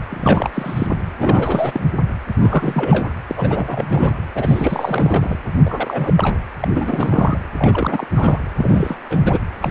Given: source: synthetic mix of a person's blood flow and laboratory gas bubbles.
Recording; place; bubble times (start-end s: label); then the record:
Doppler ultrasound of blood flow; precordium
0.09-0.50 s: bubbles
0.54-0.87 s: bubbles
0.90-0.97 s: bubbles
1.19-1.86 s: bubbles
2.42-3.09 s: bubbles
3.27-4.18 s: bubbles
4.34-5.38 s: bubbles
5.63-6.13 s: bubbles
6.17-6.37 s: bubbles
6.61-6.68 s: bubbles
6.74-7.38 s: bubbles
7.58-8.06 s: bubbles
8.14-8.39 s: bubbles
8.58-8.97 s: bubbles
9.10-9.40 s: bubbles
9.62-9.71 s: bubbles
From the record:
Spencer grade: 3 (all of the cardiac periods contain showers or single bubble signals, but not dominating or overriding the cardiac motion signals); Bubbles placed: anywhere in the cardiac cycle